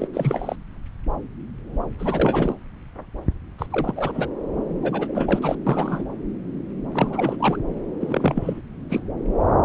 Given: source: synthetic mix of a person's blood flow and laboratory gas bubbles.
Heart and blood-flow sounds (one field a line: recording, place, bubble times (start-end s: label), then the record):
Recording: Doppler ultrasound of blood flow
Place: subclavian vein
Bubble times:
0.00-0.07 s: bubbles
0.13-0.56 s: bubbles
1.99-2.56 s: bubbles
3.58-3.66 s: bubbles
3.72-3.94 s: bubbles
3.96-4.26 s: bubbles
4.82-5.40 s: bubbles
5.42-5.55 s: bubbles
5.67-6.05 s: bubbles
6.92-7.37 s: bubbles
7.40-7.58 s: bubbles
8.00-8.61 s: bubbles
8.89-9.00 s: bubbles
From the record:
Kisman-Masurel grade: 332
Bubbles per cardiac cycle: rolling drumbeat, 9 or more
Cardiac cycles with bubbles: 50 to 99%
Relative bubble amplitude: moderate (0.250 to 0.450)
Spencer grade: 3 (all of the cardiac periods contain showers or single bubble signals, but not dominating or overriding the cardiac motion signals)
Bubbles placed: anywhere in the cardiac cycle